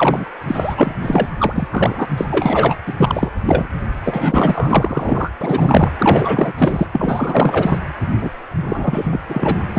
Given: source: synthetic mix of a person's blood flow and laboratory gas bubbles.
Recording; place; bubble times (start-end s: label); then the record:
Doppler ultrasound of blood flow; precordium
0.00-0.27 s: bubbles
0.47-0.94 s: bubbles
1.02-1.28 s: bubbles
1.38-1.68 s: bubbles
1.71-2.06 s: bubbles
2.17-2.25 s: bubbles
2.30-2.76 s: bubbles
2.86-2.94 s: bubbles
2.97-3.32 s: bubbles
3.45-3.67 s: bubbles
4.04-5.30 s: bubbles
5.41-5.92 s: bubbles
5.98-6.87 s: bubbles
6.92-7.79 s: bubbles
8.20-8.30 s: bubbles
8.62-9.20 s: bubbles
9.28-9.60 s: bubbles
9.74-9.79 s: bubbles
From the record:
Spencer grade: 4 (maximum detectable bubble signal sounding continuously throughout systole and diastole of every cardiac period, and overriding the amplitude of the normal cardiac signals); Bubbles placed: anywhere in the cardiac cycle